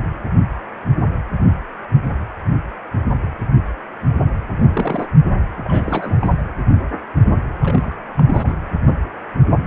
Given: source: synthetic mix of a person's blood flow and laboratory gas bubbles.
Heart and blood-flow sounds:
Doppler ultrasound of blood flow; precordium
4.58-4.64 s: bubbles
4.74-5.08 s: bubbles
5.55-6.43 s: bubbles
7.61-7.97 s: bubbles
8.17-8.53 s: bubbles
From the record:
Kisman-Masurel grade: 221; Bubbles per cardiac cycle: several, 3 to 8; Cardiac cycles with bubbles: 10 to 50%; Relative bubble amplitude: barely perceptible (0.100 to 0.250); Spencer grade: 2 (many but less than half of the cardiac periods contain bubble signals, singularly or in groups); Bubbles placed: anywhere in the cardiac cycle

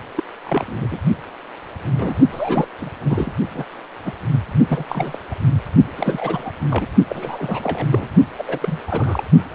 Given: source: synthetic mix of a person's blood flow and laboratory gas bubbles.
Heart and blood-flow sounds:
Doppler ultrasound of blood flow; precordium
0.15-0.24 s: bubbles
0.45-0.97 s: bubbles
1.90-2.15 s: bubbles
2.32-2.68 s: bubbles
2.82-2.90 s: bubbles
3.00-3.32 s: bubbles
3.51-3.66 s: bubbles
4.05-4.12 s: bubbles
4.67-4.84 s: bubbles
4.88-5.17 s: bubbles
5.31-5.35 s: bubbles
5.96-6.51 s: bubbles
6.69-6.88 s: bubbles
7.09-7.86 s: bubbles
7.90-8.09 s: bubbles
8.38-8.44 s: bubbles
8.48-8.59 s: bubbles
8.62-8.81 s: bubbles
8.87-9.24 s: bubbles
From the record:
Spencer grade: 3 (all of the cardiac periods contain showers or single bubble signals, but not dominating or overriding the cardiac motion signals); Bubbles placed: only in the low amplitude regions of the cardiac cycle

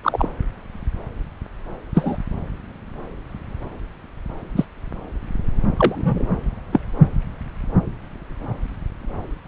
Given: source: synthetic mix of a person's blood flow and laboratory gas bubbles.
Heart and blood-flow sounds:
Doppler ultrasound of blood flow; subclavian vein
0.04-0.28 s: bubbles
1.94-2.17 s: bubbles
4.56-4.65 s: bubbles
5.77-6.31 s: bubbles
6.72-6.80 s: bubbles
From the record:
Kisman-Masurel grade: 123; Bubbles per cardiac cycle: 1 to 2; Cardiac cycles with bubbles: 10 to 50%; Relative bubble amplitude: loud (0.450 to 0.775); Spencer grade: 2 (many but less than half of the cardiac periods contain bubble signals, singularly or in groups); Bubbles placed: anywhere in the cardiac cycle

